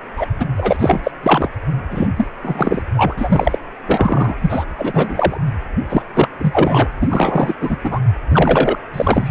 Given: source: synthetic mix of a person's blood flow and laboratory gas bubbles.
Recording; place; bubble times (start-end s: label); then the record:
Doppler ultrasound of blood flow; precordium
0.17-0.27 s: bubbles
0.39-0.45 s: bubbles
0.56-0.77 s: bubbles
0.79-1.00 s: bubbles
1.03-1.11 s: bubbles
1.23-1.49 s: bubbles
1.91-2.08 s: bubbles
2.16-2.27 s: bubbles
2.42-2.83 s: bubbles
2.97-3.58 s: bubbles
3.87-4.36 s: bubbles
4.42-4.65 s: bubbles
4.78-5.38 s: bubbles
5.88-6.03 s: bubbles
6.13-6.28 s: bubbles
6.38-6.88 s: bubbles
7.00-7.54 s: bubbles
7.61-7.77 s: bubbles
7.83-8.00 s: bubbles
8.28-8.78 s: bubbles
8.93-9.31 s: bubbles
From the record:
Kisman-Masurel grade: 333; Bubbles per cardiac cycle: rolling drumbeat, 9 or more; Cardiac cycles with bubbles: 50 to 99%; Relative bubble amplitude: loud (0.450 to 0.775); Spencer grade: 3 (all of the cardiac periods contain showers or single bubble signals, but not dominating or overriding the cardiac motion signals); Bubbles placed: anywhere in the cardiac cycle